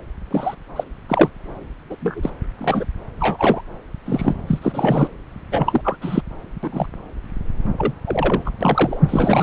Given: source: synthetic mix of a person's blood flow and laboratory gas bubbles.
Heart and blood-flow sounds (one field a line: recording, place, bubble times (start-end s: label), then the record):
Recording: Doppler ultrasound of blood flow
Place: subclavian vein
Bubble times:
0.30-0.55 s: bubbles
0.76-0.84 s: bubbles
1.09-1.29 s: bubbles
1.89-1.96 s: bubbles
2.00-2.30 s: bubbles
2.58-2.85 s: bubbles
3.14-3.61 s: bubbles
4.05-4.34 s: bubbles
4.47-4.59 s: bubbles
4.62-5.08 s: bubbles
5.51-5.81 s: bubbles
5.83-5.96 s: bubbles
6.01-6.21 s: bubbles
6.62-6.86 s: bubbles
7.77-7.93 s: bubbles
8.05-8.43 s: bubbles
8.46-8.50 s: bubbles
8.61-9.00 s: bubbles
9.09-9.43 s: bubbles
From the record:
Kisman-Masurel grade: 243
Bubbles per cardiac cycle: several, 3 to 8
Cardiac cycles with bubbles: 100%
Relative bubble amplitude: loud (0.450 to 0.775)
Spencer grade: 3 (all of the cardiac periods contain showers or single bubble signals, but not dominating or overriding the cardiac motion signals)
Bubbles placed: anywhere in the cardiac cycle